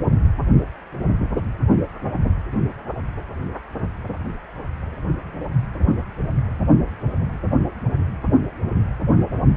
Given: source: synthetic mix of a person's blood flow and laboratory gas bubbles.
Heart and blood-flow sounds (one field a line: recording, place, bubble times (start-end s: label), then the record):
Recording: Doppler ultrasound of blood flow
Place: precordium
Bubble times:
no bubbles
From the record:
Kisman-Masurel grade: 000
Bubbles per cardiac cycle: 0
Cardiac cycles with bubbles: 0%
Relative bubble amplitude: no bubbles discernible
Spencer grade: 0 (complete lack of bubble signals)